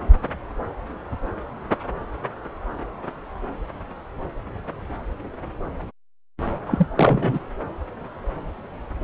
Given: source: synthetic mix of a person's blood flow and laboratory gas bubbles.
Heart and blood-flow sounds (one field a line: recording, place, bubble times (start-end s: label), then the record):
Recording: Doppler ultrasound of blood flow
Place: subclavian vein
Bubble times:
6.67-6.87 s: bubbles
6.96-7.39 s: bubbles
From the record:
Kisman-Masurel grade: 213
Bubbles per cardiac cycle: several, 3 to 8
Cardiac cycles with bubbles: 1 to 10%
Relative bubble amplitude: loud (0.450 to 0.775)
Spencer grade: 1 (occasional bubble signal discernible with the cardiac motion signal, with majority of cardiac periods free of bubbles)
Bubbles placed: anywhere in the cardiac cycle